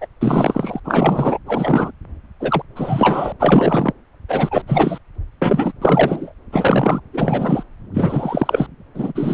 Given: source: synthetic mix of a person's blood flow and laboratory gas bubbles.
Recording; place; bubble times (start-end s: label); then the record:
Doppler ultrasound of blood flow; subclavian vein
0.00-0.07 s: bubbles
0.21-0.80 s: bubbles
0.84-1.38 s: bubbles
1.46-1.91 s: bubbles
2.40-2.62 s: bubbles
2.75-3.33 s: bubbles
3.39-3.93 s: bubbles
4.28-4.62 s: bubbles
4.67-4.98 s: bubbles
5.42-5.72 s: bubbles
5.81-6.32 s: bubbles
6.52-7.00 s: bubbles
7.13-7.63 s: bubbles
7.93-8.67 s: bubbles
8.95-9.12 s: bubbles
9.15-9.34 s: bubbles
From the record:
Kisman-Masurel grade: 343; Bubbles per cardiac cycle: rolling drumbeat, 9 or more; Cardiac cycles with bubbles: 100%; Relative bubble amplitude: loud (0.450 to 0.775); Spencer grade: 3 (all of the cardiac periods contain showers or single bubble signals, but not dominating or overriding the cardiac motion signals); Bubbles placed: anywhere in the cardiac cycle